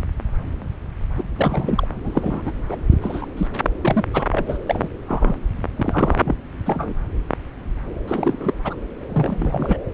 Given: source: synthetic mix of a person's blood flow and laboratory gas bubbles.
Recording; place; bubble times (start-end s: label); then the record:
Doppler ultrasound of blood flow; subclavian vein
1.17-1.24 s: bubbles
1.35-1.88 s: bubbles
2.04-2.42 s: bubbles
2.45-2.53 s: bubbles
2.69-2.76 s: bubbles
2.91-2.96 s: bubbles
3.02-3.26 s: bubbles
3.37-3.47 s: bubbles
3.82-4.04 s: bubbles
4.13-4.25 s: bubbles
4.31-4.58 s: bubbles
4.66-4.88 s: bubbles
5.08-5.40 s: bubbles
5.75-6.37 s: bubbles
6.66-6.94 s: bubbles
8.08-8.54 s: bubbles
8.64-8.77 s: bubbles
9.09-9.77 s: bubbles
From the record:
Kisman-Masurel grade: 232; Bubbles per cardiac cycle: several, 3 to 8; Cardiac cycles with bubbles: 50 to 99%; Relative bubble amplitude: moderate (0.250 to 0.450); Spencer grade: 3 (all of the cardiac periods contain showers or single bubble signals, but not dominating or overriding the cardiac motion signals); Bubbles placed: anywhere in the cardiac cycle